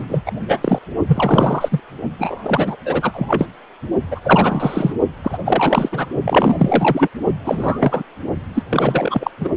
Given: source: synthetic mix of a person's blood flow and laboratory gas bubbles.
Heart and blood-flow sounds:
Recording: Doppler ultrasound of blood flow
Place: precordium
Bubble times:
0.08-0.21 s: bubbles
0.26-0.32 s: bubbles
0.48-0.79 s: bubbles
1.08-1.80 s: bubbles
2.19-2.77 s: bubbles
2.85-3.46 s: bubbles
4.11-4.94 s: bubbles
5.23-5.38 s: bubbles
5.45-5.89 s: bubbles
5.92-6.06 s: bubbles
6.21-7.08 s: bubbles
7.44-8.03 s: bubbles
8.53-8.62 s: bubbles
8.69-9.31 s: bubbles
9.39-9.48 s: bubbles
From the record:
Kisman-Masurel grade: 343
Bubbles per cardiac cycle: rolling drumbeat, 9 or more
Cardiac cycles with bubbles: 100%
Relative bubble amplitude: loud (0.450 to 0.775)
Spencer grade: 3 (all of the cardiac periods contain showers or single bubble signals, but not dominating or overriding the cardiac motion signals)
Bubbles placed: only in the low amplitude regions of the cardiac cycle

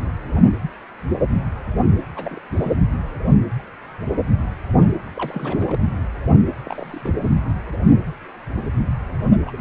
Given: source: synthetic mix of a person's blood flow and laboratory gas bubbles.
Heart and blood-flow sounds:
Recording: Doppler ultrasound of blood flow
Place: precordium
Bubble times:
2.16-2.38 s: bubbles
2.51-2.72 s: bubbles
5.17-5.86 s: bubbles
6.64-7.14 s: bubbles
7.24-7.29 s: bubbles
9.45-9.53 s: bubbles
9.57-9.61 s: bubbles
From the record:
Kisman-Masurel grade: 221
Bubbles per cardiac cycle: several, 3 to 8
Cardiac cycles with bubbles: 10 to 50%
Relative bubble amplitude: barely perceptible (0.100 to 0.250)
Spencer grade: 2 (many but less than half of the cardiac periods contain bubble signals, singularly or in groups)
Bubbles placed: anywhere in the cardiac cycle

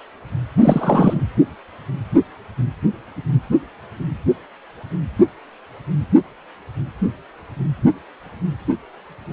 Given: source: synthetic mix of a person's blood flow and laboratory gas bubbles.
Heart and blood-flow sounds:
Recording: Doppler ultrasound of blood flow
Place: precordium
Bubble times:
0.61-1.24 s: bubbles
From the record:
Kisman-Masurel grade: 223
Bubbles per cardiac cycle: several, 3 to 8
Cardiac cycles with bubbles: 10 to 50%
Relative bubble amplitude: loud (0.450 to 0.775)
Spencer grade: 2 (many but less than half of the cardiac periods contain bubble signals, singularly or in groups)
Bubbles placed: anywhere in the cardiac cycle

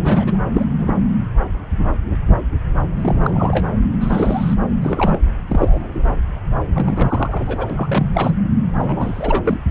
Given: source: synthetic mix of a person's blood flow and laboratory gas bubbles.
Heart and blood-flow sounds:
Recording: Doppler ultrasound of blood flow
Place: subclavian vein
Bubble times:
0.03-0.38 s: bubbles
0.52-0.66 s: bubbles
0.79-0.96 s: bubbles
2.96-3.66 s: bubbles
4.00-4.55 s: bubbles
4.82-5.21 s: bubbles
5.48-6.15 s: bubbles
6.74-7.67 s: bubbles
7.70-8.32 s: bubbles
8.75-9.60 s: bubbles
From the record:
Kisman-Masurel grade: 232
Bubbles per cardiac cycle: several, 3 to 8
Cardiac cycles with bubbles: 50 to 99%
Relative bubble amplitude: moderate (0.250 to 0.450)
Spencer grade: 3 (all of the cardiac periods contain showers or single bubble signals, but not dominating or overriding the cardiac motion signals)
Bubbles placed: anywhere in the cardiac cycle

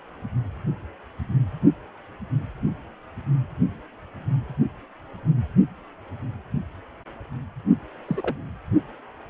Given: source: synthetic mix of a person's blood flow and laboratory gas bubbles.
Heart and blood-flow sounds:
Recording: Doppler ultrasound of blood flow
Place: precordium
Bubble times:
8.07-8.37 s: bubbles
From the record:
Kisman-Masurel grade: 211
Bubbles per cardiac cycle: several, 3 to 8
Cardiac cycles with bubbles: 1 to 10%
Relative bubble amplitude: barely perceptible (0.100 to 0.250)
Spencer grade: 1 (occasional bubble signal discernible with the cardiac motion signal, with majority of cardiac periods free of bubbles)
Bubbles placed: only in the low amplitude regions of the cardiac cycle

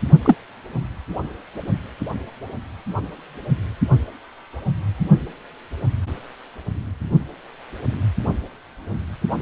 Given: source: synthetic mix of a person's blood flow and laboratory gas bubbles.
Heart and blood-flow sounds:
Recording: Doppler ultrasound of blood flow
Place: precordium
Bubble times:
0.25-0.35 s: bubbles
From the record:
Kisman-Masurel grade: 123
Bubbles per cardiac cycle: 1 to 2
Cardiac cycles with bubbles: 10 to 50%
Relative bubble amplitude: loud (0.450 to 0.775)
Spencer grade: 2 (many but less than half of the cardiac periods contain bubble signals, singularly or in groups)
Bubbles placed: anywhere in the cardiac cycle

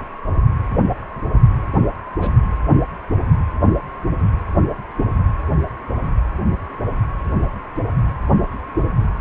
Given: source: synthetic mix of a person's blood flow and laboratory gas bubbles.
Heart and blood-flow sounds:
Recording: Doppler ultrasound of blood flow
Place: precordium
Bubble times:
2.21-2.32 s: bubbles
From the record:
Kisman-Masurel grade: 111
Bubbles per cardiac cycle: 1 to 2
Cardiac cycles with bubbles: 1 to 10%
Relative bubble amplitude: barely perceptible (0.100 to 0.250)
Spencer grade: 1 (occasional bubble signal discernible with the cardiac motion signal, with majority of cardiac periods free of bubbles)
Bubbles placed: anywhere in the cardiac cycle

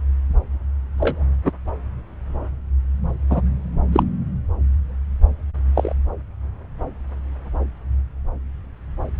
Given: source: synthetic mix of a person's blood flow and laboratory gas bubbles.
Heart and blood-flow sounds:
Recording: Doppler ultrasound of blood flow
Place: subclavian vein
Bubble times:
0.98-1.24 s: bubbles
1.45-1.51 s: bubbles
3.29-3.42 s: bubbles
3.92-4.03 s: bubbles
5.75-5.94 s: bubbles
From the record:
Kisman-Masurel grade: 123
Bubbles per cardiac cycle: 1 to 2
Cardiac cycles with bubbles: 10 to 50%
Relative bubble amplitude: loud (0.450 to 0.775)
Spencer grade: 2 (many but less than half of the cardiac periods contain bubble signals, singularly or in groups)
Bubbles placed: anywhere in the cardiac cycle

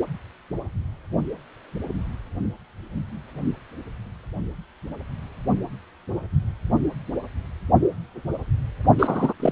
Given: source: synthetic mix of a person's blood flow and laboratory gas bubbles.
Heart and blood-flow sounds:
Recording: Doppler ultrasound of blood flow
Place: precordium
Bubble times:
8.99-9.33 s: bubbles
9.39-9.52 s: bubbles
From the record:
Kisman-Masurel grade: 213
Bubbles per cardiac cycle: several, 3 to 8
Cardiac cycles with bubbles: 1 to 10%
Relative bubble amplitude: loud (0.450 to 0.775)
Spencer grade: 1 (occasional bubble signal discernible with the cardiac motion signal, with majority of cardiac periods free of bubbles)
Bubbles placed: only in the low amplitude regions of the cardiac cycle

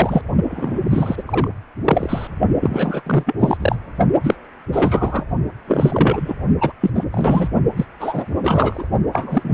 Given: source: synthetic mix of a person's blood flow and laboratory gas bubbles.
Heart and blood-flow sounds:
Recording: Doppler ultrasound of blood flow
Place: precordium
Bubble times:
0.00-0.23 s: bubbles
0.49-0.81 s: bubbles
0.90-1.23 s: bubbles
1.27-1.50 s: bubbles
1.84-2.27 s: bubbles
2.60-3.01 s: bubbles
3.06-3.35 s: bubbles
3.39-3.57 s: bubbles
3.60-3.75 s: bubbles
4.23-4.38 s: bubbles
4.72-5.25 s: bubbles
5.67-6.35 s: bubbles
6.60-6.73 s: bubbles
6.81-6.91 s: bubbles
6.95-7.04 s: bubbles
7.11-7.49 s: bubbles
7.76-7.85 s: bubbles
8.00-8.41 s: bubbles
8.43-8.87 s: bubbles
9.12-9.54 s: bubbles
From the record:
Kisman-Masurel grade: 343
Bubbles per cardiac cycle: rolling drumbeat, 9 or more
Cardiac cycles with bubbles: 100%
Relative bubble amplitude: loud (0.450 to 0.775)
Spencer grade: 3 (all of the cardiac periods contain showers or single bubble signals, but not dominating or overriding the cardiac motion signals)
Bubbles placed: only in the low amplitude regions of the cardiac cycle

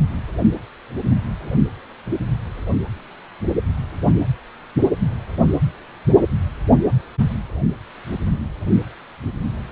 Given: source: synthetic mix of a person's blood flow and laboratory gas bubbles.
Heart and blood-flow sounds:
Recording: Doppler ultrasound of blood flow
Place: precordium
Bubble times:
no bubbles
From the record:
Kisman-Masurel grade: 000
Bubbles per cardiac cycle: 0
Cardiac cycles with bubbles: 0%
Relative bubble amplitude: no bubbles discernible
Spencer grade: 0 (complete lack of bubble signals)

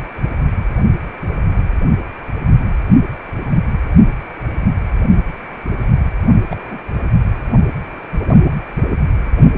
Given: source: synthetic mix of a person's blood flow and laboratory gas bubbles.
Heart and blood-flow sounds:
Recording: Doppler ultrasound of blood flow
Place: precordium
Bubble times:
6.38-6.43 s: bubbles
6.51-6.79 s: bubbles
From the record:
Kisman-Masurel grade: 211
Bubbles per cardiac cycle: several, 3 to 8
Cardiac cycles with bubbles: 1 to 10%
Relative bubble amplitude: barely perceptible (0.100 to 0.250)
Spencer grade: 1 (occasional bubble signal discernible with the cardiac motion signal, with majority of cardiac periods free of bubbles)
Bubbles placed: anywhere in the cardiac cycle

